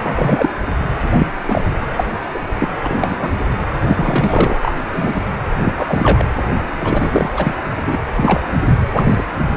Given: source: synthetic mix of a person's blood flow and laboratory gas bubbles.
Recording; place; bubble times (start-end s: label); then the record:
Doppler ultrasound of blood flow; precordium
0.03-0.50 s: bubbles
0.65-0.73 s: bubbles
1.12-1.27 s: bubbles
1.38-1.64 s: bubbles
1.96-2.05 s: bubbles
2.33-2.40 s: bubbles
2.59-2.69 s: bubbles
2.79-3.32 s: bubbles
3.82-4.58 s: bubbles
4.62-4.71 s: bubbles
4.92-5.22 s: bubbles
5.58-6.29 s: bubbles
6.80-7.30 s: bubbles
7.37-7.55 s: bubbles
7.87-7.98 s: bubbles
8.16-8.40 s: bubbles
8.96-9.24 s: bubbles
From the record:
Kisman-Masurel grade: 243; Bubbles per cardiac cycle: several, 3 to 8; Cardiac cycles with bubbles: 100%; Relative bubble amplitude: loud (0.450 to 0.775); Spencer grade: 3 (all of the cardiac periods contain showers or single bubble signals, but not dominating or overriding the cardiac motion signals); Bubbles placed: anywhere in the cardiac cycle